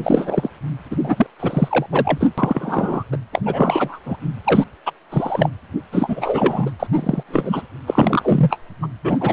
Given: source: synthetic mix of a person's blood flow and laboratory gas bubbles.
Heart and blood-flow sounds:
Doppler ultrasound of blood flow; precordium
0.00-0.49 s: bubbles
0.90-0.96 s: bubbles
1.00-1.27 s: bubbles
1.40-1.86 s: bubbles
1.92-2.29 s: bubbles
2.38-3.04 s: bubbles
3.11-3.17 s: bubbles
3.32-4.00 s: bubbles
4.05-4.17 s: bubbles
4.44-4.64 s: bubbles
4.85-4.91 s: bubbles
5.11-5.50 s: bubbles
5.92-6.71 s: bubbles
6.79-6.87 s: bubbles
6.92-7.23 s: bubbles
7.28-7.62 s: bubbles
7.86-8.58 s: bubbles
8.82-8.87 s: bubbles
9.04-9.33 s: bubbles
From the record:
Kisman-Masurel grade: 343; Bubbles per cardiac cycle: rolling drumbeat, 9 or more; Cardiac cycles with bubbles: 100%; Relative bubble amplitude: loud (0.450 to 0.775); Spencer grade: 3 (all of the cardiac periods contain showers or single bubble signals, but not dominating or overriding the cardiac motion signals); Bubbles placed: anywhere in the cardiac cycle

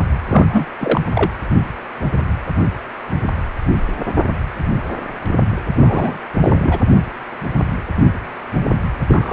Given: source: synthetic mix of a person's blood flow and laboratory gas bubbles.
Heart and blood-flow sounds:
Doppler ultrasound of blood flow; precordium
0.29-0.66 s: bubbles
0.80-1.01 s: bubbles
1.15-1.30 s: bubbles
5.80-6.17 s: bubbles
6.31-6.80 s: bubbles
9.08-9.33 s: bubbles
From the record:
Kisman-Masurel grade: 222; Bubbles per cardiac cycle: several, 3 to 8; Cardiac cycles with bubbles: 10 to 50%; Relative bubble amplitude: moderate (0.250 to 0.450); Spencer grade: 2 (many but less than half of the cardiac periods contain bubble signals, singularly or in groups); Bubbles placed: anywhere in the cardiac cycle

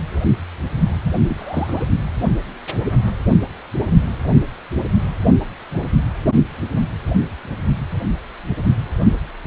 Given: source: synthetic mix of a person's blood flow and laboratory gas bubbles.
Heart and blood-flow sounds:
Doppler ultrasound of blood flow; precordium
1.28-1.83 s: bubbles
From the record:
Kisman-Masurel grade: 211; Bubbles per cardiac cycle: several, 3 to 8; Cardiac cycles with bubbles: 1 to 10%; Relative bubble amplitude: barely perceptible (0.100 to 0.250); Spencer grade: 1 (occasional bubble signal discernible with the cardiac motion signal, with majority of cardiac periods free of bubbles); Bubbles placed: only in the low amplitude regions of the cardiac cycle

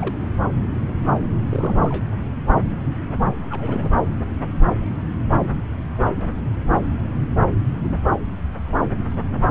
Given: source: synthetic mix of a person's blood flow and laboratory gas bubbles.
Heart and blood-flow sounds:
Doppler ultrasound of blood flow; subclavian vein
0.00-0.16 s: bubbles
1.48-2.04 s: bubbles
3.50-3.98 s: bubbles
From the record:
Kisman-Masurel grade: 221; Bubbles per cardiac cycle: several, 3 to 8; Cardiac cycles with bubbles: 10 to 50%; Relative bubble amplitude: barely perceptible (0.100 to 0.250); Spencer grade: 2 (many but less than half of the cardiac periods contain bubble signals, singularly or in groups); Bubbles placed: anywhere in the cardiac cycle

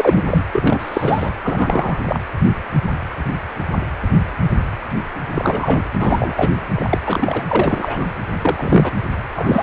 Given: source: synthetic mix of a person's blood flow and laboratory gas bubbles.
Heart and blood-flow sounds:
Doppler ultrasound of blood flow; precordium
0.00-0.23 s: bubbles
0.27-0.45 s: bubbles
0.53-1.30 s: bubbles
1.43-2.01 s: bubbles
2.06-2.20 s: bubbles
5.34-5.89 s: bubbles
5.99-6.49 s: bubbles
6.75-6.98 s: bubbles
7.06-7.43 s: bubbles
7.49-8.12 s: bubbles
8.42-8.93 s: bubbles
9.36-9.62 s: bubbles
From the record:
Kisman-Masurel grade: 333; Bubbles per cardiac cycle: rolling drumbeat, 9 or more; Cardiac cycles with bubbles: 50 to 99%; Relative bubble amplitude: loud (0.450 to 0.775); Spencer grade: 3 (all of the cardiac periods contain showers or single bubble signals, but not dominating or overriding the cardiac motion signals); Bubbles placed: anywhere in the cardiac cycle

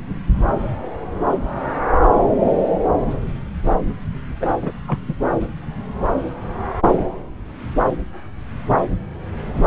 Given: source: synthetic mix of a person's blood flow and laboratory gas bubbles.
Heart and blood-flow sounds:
Doppler ultrasound of blood flow; subclavian vein
4.40-4.57 s: bubbles
4.61-4.71 s: bubbles
4.87-4.98 s: bubbles
5.07-5.14 s: bubbles
5.40-5.47 s: bubbles
From the record:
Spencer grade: 2 (many but less than half of the cardiac periods contain bubble signals, singularly or in groups); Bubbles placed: anywhere in the cardiac cycle

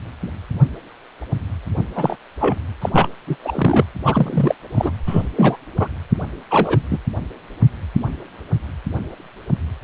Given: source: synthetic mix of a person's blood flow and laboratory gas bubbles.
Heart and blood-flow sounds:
Doppler ultrasound of blood flow; precordium
1.95-2.16 s: bubbles
2.40-2.56 s: bubbles
2.81-2.89 s: bubbles
2.93-3.08 s: bubbles
3.27-3.36 s: bubbles
3.43-3.85 s: bubbles
4.04-4.55 s: bubbles
4.75-4.91 s: bubbles
5.07-5.23 s: bubbles
5.36-5.57 s: bubbles
5.80-5.89 s: bubbles
6.51-6.81 s: bubbles
6.91-6.98 s: bubbles
From the record:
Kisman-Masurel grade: 233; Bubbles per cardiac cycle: several, 3 to 8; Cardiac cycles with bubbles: 50 to 99%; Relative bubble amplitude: loud (0.450 to 0.775); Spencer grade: 3 (all of the cardiac periods contain showers or single bubble signals, but not dominating or overriding the cardiac motion signals); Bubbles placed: anywhere in the cardiac cycle

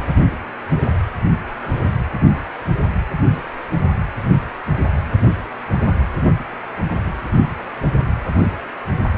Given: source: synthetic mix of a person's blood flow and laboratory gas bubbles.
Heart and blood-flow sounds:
Doppler ultrasound of blood flow; precordium
no bubbles
From the record:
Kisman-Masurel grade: 000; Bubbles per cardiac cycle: 0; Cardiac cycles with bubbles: 0%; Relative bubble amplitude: no bubbles discernible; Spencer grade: 0 (complete lack of bubble signals)

